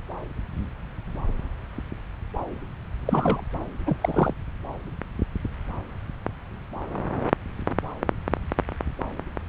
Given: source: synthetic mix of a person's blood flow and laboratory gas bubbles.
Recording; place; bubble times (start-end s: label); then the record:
Doppler ultrasound of blood flow; subclavian vein
3.05-3.42 s: bubbles
3.85-3.97 s: bubbles
4.01-4.33 s: bubbles
From the record:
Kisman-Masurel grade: 212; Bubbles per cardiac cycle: several, 3 to 8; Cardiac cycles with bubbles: 1 to 10%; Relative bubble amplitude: moderate (0.250 to 0.450); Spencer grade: 1 (occasional bubble signal discernible with the cardiac motion signal, with majority of cardiac periods free of bubbles); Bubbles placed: anywhere in the cardiac cycle